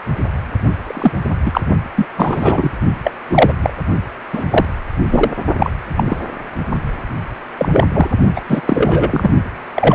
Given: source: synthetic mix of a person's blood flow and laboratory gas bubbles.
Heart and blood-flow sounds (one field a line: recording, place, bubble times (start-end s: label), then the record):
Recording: Doppler ultrasound of blood flow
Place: precordium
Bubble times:
0.84-1.14 s: bubbles
1.46-1.61 s: bubbles
1.96-2.08 s: bubbles
2.17-2.71 s: bubbles
3.03-3.12 s: bubbles
3.30-3.53 s: bubbles
3.62-3.74 s: bubbles
4.33-4.44 s: bubbles
4.50-4.65 s: bubbles
5.11-5.31 s: bubbles
5.58-5.70 s: bubbles
5.96-6.18 s: bubbles
7.57-7.84 s: bubbles
7.93-8.08 s: bubbles
8.36-8.40 s: bubbles
8.49-8.61 s: bubbles
8.64-9.30 s: bubbles
9.76-9.95 s: bubbles
From the record:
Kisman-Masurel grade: 243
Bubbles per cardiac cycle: several, 3 to 8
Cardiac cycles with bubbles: 100%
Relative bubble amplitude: loud (0.450 to 0.775)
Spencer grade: 3 (all of the cardiac periods contain showers or single bubble signals, but not dominating or overriding the cardiac motion signals)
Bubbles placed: only in the low amplitude regions of the cardiac cycle